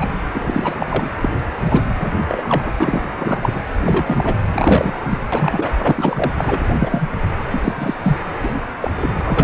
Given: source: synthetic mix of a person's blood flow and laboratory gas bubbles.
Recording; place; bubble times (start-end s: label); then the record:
Doppler ultrasound of blood flow; precordium
0.00-0.13 s: bubbles
0.34-0.77 s: bubbles
0.79-0.86 s: bubbles
0.90-1.09 s: bubbles
1.22-1.30 s: bubbles
1.57-1.82 s: bubbles
1.98-2.11 s: bubbles
2.28-2.75 s: bubbles
2.80-3.06 s: bubbles
3.19-3.63 s: bubbles
3.85-4.34 s: bubbles
4.53-5.01 s: bubbles
5.09-5.18 s: bubbles
5.32-5.72 s: bubbles
5.78-6.32 s: bubbles
6.38-6.63 s: bubbles
6.78-7.09 s: bubbles
7.50-7.72 s: bubbles
7.75-7.95 s: bubbles
8.02-8.18 s: bubbles
8.42-8.54 s: bubbles
8.80-8.90 s: bubbles
8.98-9.11 s: bubbles
9.24-9.44 s: bubbles
From the record:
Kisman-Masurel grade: 243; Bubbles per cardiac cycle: several, 3 to 8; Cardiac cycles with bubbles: 100%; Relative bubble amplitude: loud (0.450 to 0.775); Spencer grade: 3 (all of the cardiac periods contain showers or single bubble signals, but not dominating or overriding the cardiac motion signals); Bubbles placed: anywhere in the cardiac cycle